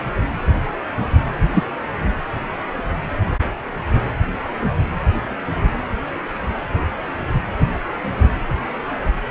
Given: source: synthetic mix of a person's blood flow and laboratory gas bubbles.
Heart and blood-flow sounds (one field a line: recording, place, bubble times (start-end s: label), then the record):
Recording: Doppler ultrasound of blood flow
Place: precordium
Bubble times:
1.53-1.63 s: bubbles
From the record:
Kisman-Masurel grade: 123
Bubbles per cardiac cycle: 1 to 2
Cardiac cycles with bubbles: 10 to 50%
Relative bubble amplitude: loud (0.450 to 0.775)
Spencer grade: 2 (many but less than half of the cardiac periods contain bubble signals, singularly or in groups)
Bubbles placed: anywhere in the cardiac cycle